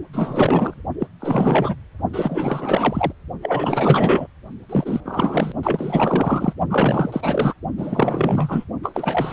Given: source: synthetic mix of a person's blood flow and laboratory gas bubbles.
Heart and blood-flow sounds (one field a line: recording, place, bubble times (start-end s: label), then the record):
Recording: Doppler ultrasound of blood flow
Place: precordium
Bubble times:
0.12-0.82 s: bubbles
1.00-1.07 s: bubbles
1.20-1.77 s: bubbles
2.13-3.12 s: bubbles
3.42-4.27 s: bubbles
4.69-5.00 s: bubbles
5.05-5.52 s: bubbles
5.63-6.53 s: bubbles
6.69-7.53 s: bubbles
7.77-8.65 s: bubbles
8.83-9.33 s: bubbles
From the record:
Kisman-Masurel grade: 444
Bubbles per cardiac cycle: continuous sound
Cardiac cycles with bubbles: 100%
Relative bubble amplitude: maximal (0.775 to 0.999)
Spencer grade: 4 (maximum detectable bubble signal sounding continuously throughout systole and diastole of every cardiac period, and overriding the amplitude of the normal cardiac signals)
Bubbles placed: only in the low amplitude regions of the cardiac cycle